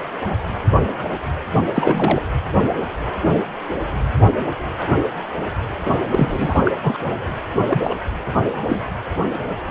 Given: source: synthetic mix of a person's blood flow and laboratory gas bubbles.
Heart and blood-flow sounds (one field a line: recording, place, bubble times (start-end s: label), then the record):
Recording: Doppler ultrasound of blood flow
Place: precordium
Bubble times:
1.74-2.23 s: bubbles
6.11-6.61 s: bubbles
6.65-6.71 s: bubbles
6.83-6.98 s: bubbles
7.70-7.95 s: bubbles
8.69-8.76 s: bubbles
From the record:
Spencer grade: 2 (many but less than half of the cardiac periods contain bubble signals, singularly or in groups)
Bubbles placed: anywhere in the cardiac cycle